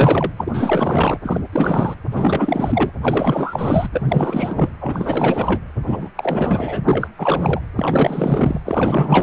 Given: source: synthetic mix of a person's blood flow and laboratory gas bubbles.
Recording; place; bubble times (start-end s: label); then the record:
Doppler ultrasound of blood flow; precordium
0.00-0.32 s: bubbles
0.37-1.19 s: bubbles
1.22-1.41 s: bubbles
1.52-1.97 s: bubbles
2.12-2.91 s: bubbles
3.02-3.89 s: bubbles
3.92-4.69 s: bubbles
4.80-5.61 s: bubbles
5.87-6.09 s: bubbles
6.16-6.83 s: bubbles
6.87-7.08 s: bubbles
7.17-7.60 s: bubbles
7.76-8.61 s: bubbles
8.65-9.23 s: bubbles
From the record:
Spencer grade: 4 (maximum detectable bubble signal sounding continuously throughout systole and diastole of every cardiac period, and overriding the amplitude of the normal cardiac signals); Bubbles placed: anywhere in the cardiac cycle